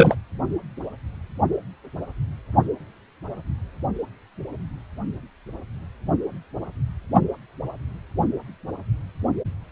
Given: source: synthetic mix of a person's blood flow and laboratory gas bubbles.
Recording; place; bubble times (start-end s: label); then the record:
Doppler ultrasound of blood flow; precordium
0.00-0.15 s: bubbles
From the record:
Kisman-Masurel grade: 213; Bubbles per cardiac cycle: several, 3 to 8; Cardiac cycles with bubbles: 1 to 10%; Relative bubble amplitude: loud (0.450 to 0.775); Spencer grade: 1 (occasional bubble signal discernible with the cardiac motion signal, with majority of cardiac periods free of bubbles); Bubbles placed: only in the low amplitude regions of the cardiac cycle